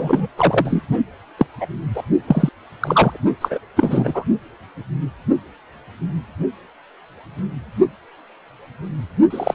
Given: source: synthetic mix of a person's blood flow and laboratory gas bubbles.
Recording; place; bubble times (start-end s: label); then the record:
Doppler ultrasound of blood flow; precordium
0.00-0.28 s: bubbles
0.38-0.81 s: bubbles
1.38-1.46 s: bubbles
1.60-1.67 s: bubbles
1.94-2.03 s: bubbles
2.27-2.49 s: bubbles
2.81-3.18 s: bubbles
3.41-3.58 s: bubbles
3.76-4.25 s: bubbles
9.30-9.54 s: bubbles
From the record:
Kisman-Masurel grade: 223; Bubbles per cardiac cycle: several, 3 to 8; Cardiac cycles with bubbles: 10 to 50%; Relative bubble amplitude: loud (0.450 to 0.775); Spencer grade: 2 (many but less than half of the cardiac periods contain bubble signals, singularly or in groups); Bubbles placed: only in the low amplitude regions of the cardiac cycle